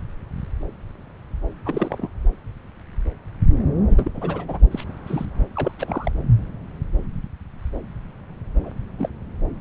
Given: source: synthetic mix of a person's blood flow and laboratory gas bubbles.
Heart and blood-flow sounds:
Doppler ultrasound of blood flow; subclavian vein
1.66-2.10 s: bubbles
3.89-4.11 s: bubbles
4.14-4.60 s: bubbles
4.71-4.84 s: bubbles
5.07-5.26 s: bubbles
5.56-5.72 s: bubbles
5.79-6.12 s: bubbles
8.63-8.71 s: bubbles
8.98-9.09 s: bubbles
From the record:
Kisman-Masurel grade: 221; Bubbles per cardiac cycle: several, 3 to 8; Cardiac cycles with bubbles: 10 to 50%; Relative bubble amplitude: barely perceptible (0.100 to 0.250); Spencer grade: 2 (many but less than half of the cardiac periods contain bubble signals, singularly or in groups); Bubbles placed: anywhere in the cardiac cycle

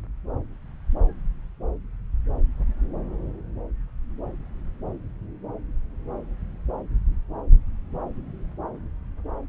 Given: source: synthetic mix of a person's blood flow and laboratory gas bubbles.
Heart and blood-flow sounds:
Doppler ultrasound of blood flow; subclavian vein
no bubbles
From the record:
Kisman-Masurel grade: 000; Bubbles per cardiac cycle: 0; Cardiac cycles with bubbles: 0%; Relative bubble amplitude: no bubbles discernible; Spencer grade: 0 (complete lack of bubble signals)

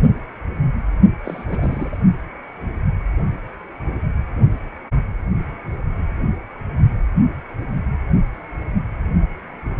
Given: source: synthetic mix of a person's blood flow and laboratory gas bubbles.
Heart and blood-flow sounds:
Doppler ultrasound of blood flow; precordium
1.24-1.45 s: bubbles
1.47-1.98 s: bubbles
From the record:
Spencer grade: 1 (occasional bubble signal discernible with the cardiac motion signal, with majority of cardiac periods free of bubbles); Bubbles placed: only in the low amplitude regions of the cardiac cycle

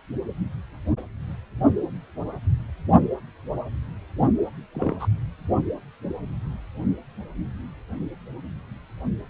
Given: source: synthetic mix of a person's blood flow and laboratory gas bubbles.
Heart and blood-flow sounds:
Doppler ultrasound of blood flow; precordium
4.21-4.28 s: bubbles
4.74-4.94 s: bubbles
4.99-5.07 s: bubbles
From the record:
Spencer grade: 1 (occasional bubble signal discernible with the cardiac motion signal, with majority of cardiac periods free of bubbles); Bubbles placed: anywhere in the cardiac cycle

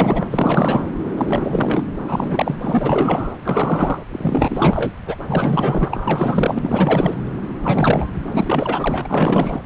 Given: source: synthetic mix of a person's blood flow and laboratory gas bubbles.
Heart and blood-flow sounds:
Doppler ultrasound of blood flow; subclavian vein
0.00-0.27 s: bubbles
0.30-0.82 s: bubbles
1.17-1.84 s: bubbles
2.07-2.56 s: bubbles
2.60-3.33 s: bubbles
3.44-3.97 s: bubbles
4.12-4.92 s: bubbles
5.06-5.17 s: bubbles
5.28-7.15 s: bubbles
7.61-8.07 s: bubbles
8.32-9.60 s: bubbles
From the record:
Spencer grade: 4 (maximum detectable bubble signal sounding continuously throughout systole and diastole of every cardiac period, and overriding the amplitude of the normal cardiac signals); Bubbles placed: anywhere in the cardiac cycle

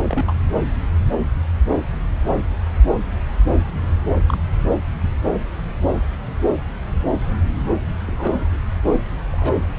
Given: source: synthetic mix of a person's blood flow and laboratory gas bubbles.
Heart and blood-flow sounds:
Doppler ultrasound of blood flow; subclavian vein
0.00-0.33 s: bubbles
4.13-4.19 s: bubbles
4.26-4.38 s: bubbles
8.07-8.46 s: bubbles
9.33-9.54 s: bubbles
From the record:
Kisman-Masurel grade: 122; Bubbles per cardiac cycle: 1 to 2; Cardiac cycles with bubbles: 10 to 50%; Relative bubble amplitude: moderate (0.250 to 0.450); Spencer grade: 2 (many but less than half of the cardiac periods contain bubble signals, singularly or in groups); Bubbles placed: anywhere in the cardiac cycle

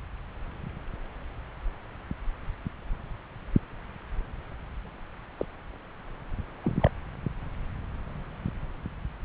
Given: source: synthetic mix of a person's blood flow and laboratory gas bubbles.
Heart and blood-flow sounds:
Doppler ultrasound of blood flow; subclavian vein
5.38-5.46 s: bubbles
6.62-6.71 s: bubbles
6.80-6.91 s: bubbles
From the record:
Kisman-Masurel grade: 221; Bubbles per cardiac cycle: several, 3 to 8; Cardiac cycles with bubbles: 10 to 50%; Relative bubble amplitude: barely perceptible (0.100 to 0.250); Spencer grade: 2 (many but less than half of the cardiac periods contain bubble signals, singularly or in groups); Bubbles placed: anywhere in the cardiac cycle

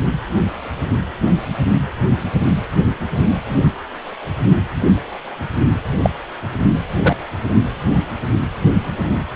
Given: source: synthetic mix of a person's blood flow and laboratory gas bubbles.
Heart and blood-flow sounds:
Doppler ultrasound of blood flow; precordium
6.03-6.10 s: bubbles
7.04-7.16 s: bubbles
From the record:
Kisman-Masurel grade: 113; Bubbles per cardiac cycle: 1 to 2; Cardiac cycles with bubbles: 1 to 10%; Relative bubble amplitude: loud (0.450 to 0.775); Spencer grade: 1 (occasional bubble signal discernible with the cardiac motion signal, with majority of cardiac periods free of bubbles); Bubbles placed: only in the low amplitude regions of the cardiac cycle

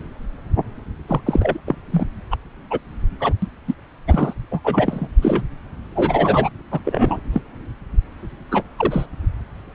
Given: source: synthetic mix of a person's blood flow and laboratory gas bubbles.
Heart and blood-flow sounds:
Doppler ultrasound of blood flow; subclavian vein
1.08-1.21 s: bubbles
1.26-1.59 s: bubbles
1.66-1.75 s: bubbles
1.92-2.06 s: bubbles
2.31-2.36 s: bubbles
2.70-2.79 s: bubbles
3.20-3.33 s: bubbles
3.42-3.47 s: bubbles
3.67-3.75 s: bubbles
4.08-4.33 s: bubbles
4.51-4.60 s: bubbles
4.64-5.08 s: bubbles
5.21-5.42 s: bubbles
5.96-6.50 s: bubbles
6.71-6.79 s: bubbles
6.85-7.20 s: bubbles
7.32-7.42 s: bubbles
8.51-8.62 s: bubbles
8.77-9.06 s: bubbles
From the record:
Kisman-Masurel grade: 232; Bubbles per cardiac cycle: several, 3 to 8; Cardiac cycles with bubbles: 50 to 99%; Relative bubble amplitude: moderate (0.250 to 0.450); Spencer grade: 3 (all of the cardiac periods contain showers or single bubble signals, but not dominating or overriding the cardiac motion signals); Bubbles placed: anywhere in the cardiac cycle

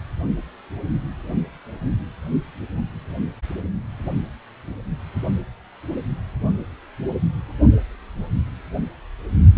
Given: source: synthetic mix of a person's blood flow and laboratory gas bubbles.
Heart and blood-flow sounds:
Doppler ultrasound of blood flow; precordium
no bubbles
From the record:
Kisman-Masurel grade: 000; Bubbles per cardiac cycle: 0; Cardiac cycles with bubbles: 0%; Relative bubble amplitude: no bubbles discernible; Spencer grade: 0 (complete lack of bubble signals)

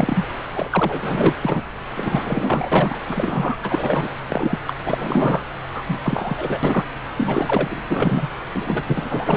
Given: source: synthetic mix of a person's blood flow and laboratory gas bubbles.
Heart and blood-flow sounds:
Doppler ultrasound of blood flow; subclavian vein
0.00-0.26 s: bubbles
0.54-1.34 s: bubbles
1.44-1.62 s: bubbles
1.96-3.00 s: bubbles
3.08-3.57 s: bubbles
3.62-4.08 s: bubbles
4.29-4.59 s: bubbles
4.67-4.74 s: bubbles
4.86-4.95 s: bubbles
4.97-5.42 s: bubbles
5.74-5.83 s: bubbles
5.88-5.99 s: bubbles
6.03-6.59 s: bubbles
6.63-6.85 s: bubbles
7.16-7.83 s: bubbles
7.90-8.29 s: bubbles
8.53-9.37 s: bubbles
From the record:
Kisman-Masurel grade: 343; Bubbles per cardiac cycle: rolling drumbeat, 9 or more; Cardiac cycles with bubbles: 100%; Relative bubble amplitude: loud (0.450 to 0.775); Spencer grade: 3 (all of the cardiac periods contain showers or single bubble signals, but not dominating or overriding the cardiac motion signals); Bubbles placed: anywhere in the cardiac cycle

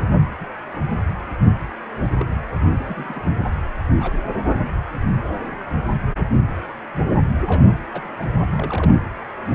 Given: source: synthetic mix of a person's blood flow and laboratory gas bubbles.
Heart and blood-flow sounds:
Doppler ultrasound of blood flow; precordium
0.40-0.45 s: bubbles
2.19-2.26 s: bubbles
2.75-3.23 s: bubbles
4.00-4.13 s: bubbles
4.76-4.81 s: bubbles
7.46-7.62 s: bubbles
7.92-8.10 s: bubbles
8.19-8.37 s: bubbles
8.51-8.94 s: bubbles
From the record:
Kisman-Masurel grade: 121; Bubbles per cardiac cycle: 1 to 2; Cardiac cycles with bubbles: 10 to 50%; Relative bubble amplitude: barely perceptible (0.100 to 0.250); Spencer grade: 2 (many but less than half of the cardiac periods contain bubble signals, singularly or in groups); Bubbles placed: anywhere in the cardiac cycle

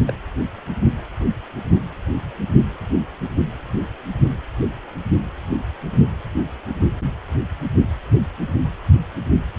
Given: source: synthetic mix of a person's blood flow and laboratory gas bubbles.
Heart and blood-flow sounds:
Doppler ultrasound of blood flow; precordium
0.06-0.14 s: bubbles
From the record:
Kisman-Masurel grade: 111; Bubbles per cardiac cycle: 1 to 2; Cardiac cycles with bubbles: 1 to 10%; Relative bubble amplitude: barely perceptible (0.100 to 0.250); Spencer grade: 1 (occasional bubble signal discernible with the cardiac motion signal, with majority of cardiac periods free of bubbles); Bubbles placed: only in the low amplitude regions of the cardiac cycle

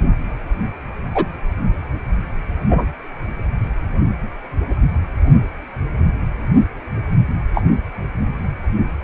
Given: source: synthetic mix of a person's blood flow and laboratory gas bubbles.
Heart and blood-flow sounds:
Doppler ultrasound of blood flow; precordium
1.14-1.26 s: bubbles
2.70-2.85 s: bubbles
7.54-7.64 s: bubbles
From the record:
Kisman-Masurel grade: 123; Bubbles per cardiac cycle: 1 to 2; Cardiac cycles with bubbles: 10 to 50%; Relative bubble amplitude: loud (0.450 to 0.775); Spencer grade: 2 (many but less than half of the cardiac periods contain bubble signals, singularly or in groups); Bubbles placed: anywhere in the cardiac cycle

